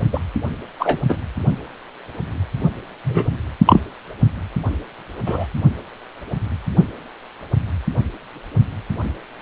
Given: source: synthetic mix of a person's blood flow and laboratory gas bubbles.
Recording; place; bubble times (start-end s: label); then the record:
Doppler ultrasound of blood flow; precordium
0.12-0.19 s: bubbles
0.79-0.98 s: bubbles
1.08-1.18 s: bubbles
3.04-3.26 s: bubbles
3.66-3.81 s: bubbles
5.26-5.46 s: bubbles
From the record:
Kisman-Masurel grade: 123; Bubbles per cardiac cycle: 1 to 2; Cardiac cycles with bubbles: 10 to 50%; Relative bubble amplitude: loud (0.450 to 0.775); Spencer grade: 2 (many but less than half of the cardiac periods contain bubble signals, singularly or in groups); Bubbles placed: only in the low amplitude regions of the cardiac cycle